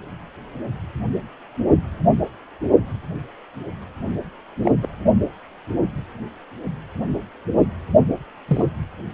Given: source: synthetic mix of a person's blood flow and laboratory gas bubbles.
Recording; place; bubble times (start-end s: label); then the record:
Doppler ultrasound of blood flow; precordium
4.62-4.71 s: bubbles
4.82-4.88 s: bubbles
8.48-8.66 s: bubbles
From the record:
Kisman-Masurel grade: 122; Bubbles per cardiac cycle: 1 to 2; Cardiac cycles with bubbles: 10 to 50%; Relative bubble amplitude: moderate (0.250 to 0.450); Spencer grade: 2 (many but less than half of the cardiac periods contain bubble signals, singularly or in groups); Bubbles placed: only in the low amplitude regions of the cardiac cycle